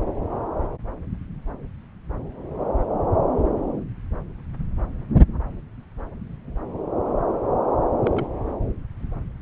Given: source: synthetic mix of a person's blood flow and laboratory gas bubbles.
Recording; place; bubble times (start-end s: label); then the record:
Doppler ultrasound of blood flow; subclavian vein
8.04-8.26 s: bubbles
From the record:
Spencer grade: 1 (occasional bubble signal discernible with the cardiac motion signal, with majority of cardiac periods free of bubbles); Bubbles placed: anywhere in the cardiac cycle